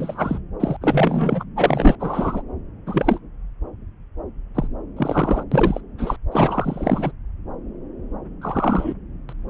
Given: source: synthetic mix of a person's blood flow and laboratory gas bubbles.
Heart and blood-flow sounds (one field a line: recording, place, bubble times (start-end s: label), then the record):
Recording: Doppler ultrasound of blood flow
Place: subclavian vein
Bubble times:
0.00-0.40 s: bubbles
0.59-0.76 s: bubbles
0.81-1.44 s: bubbles
1.56-1.96 s: bubbles
2.00-2.42 s: bubbles
2.86-3.19 s: bubbles
4.54-4.67 s: bubbles
4.96-5.43 s: bubbles
5.51-5.80 s: bubbles
5.98-6.17 s: bubbles
6.30-7.12 s: bubbles
8.42-8.94 s: bubbles
9.29-9.33 s: bubbles
From the record:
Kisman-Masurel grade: 233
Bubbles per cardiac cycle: several, 3 to 8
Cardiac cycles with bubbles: 50 to 99%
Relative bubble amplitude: loud (0.450 to 0.775)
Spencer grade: 3 (all of the cardiac periods contain showers or single bubble signals, but not dominating or overriding the cardiac motion signals)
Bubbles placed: anywhere in the cardiac cycle